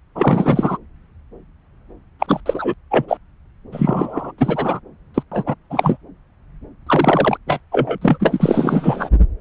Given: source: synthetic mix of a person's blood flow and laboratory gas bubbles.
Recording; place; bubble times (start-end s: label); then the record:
Doppler ultrasound of blood flow; subclavian vein
0.15-0.78 s: bubbles
2.19-2.41 s: bubbles
2.46-2.74 s: bubbles
2.91-3.17 s: bubbles
3.72-4.31 s: bubbles
4.38-4.79 s: bubbles
5.14-5.23 s: bubbles
5.31-5.43 s: bubbles
5.46-5.54 s: bubbles
5.70-5.97 s: bubbles
6.86-7.38 s: bubbles
7.46-7.60 s: bubbles
7.71-7.98 s: bubbles
8.01-9.09 s: bubbles
From the record:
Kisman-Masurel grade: 333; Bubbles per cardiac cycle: rolling drumbeat, 9 or more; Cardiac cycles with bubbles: 50 to 99%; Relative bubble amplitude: loud (0.450 to 0.775); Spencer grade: 3 (all of the cardiac periods contain showers or single bubble signals, but not dominating or overriding the cardiac motion signals); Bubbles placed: anywhere in the cardiac cycle